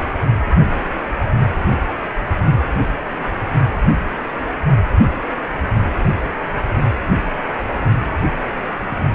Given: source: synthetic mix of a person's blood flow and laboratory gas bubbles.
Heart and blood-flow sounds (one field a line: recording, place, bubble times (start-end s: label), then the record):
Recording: Doppler ultrasound of blood flow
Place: precordium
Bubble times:
no bubbles
From the record:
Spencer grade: 0 (complete lack of bubble signals)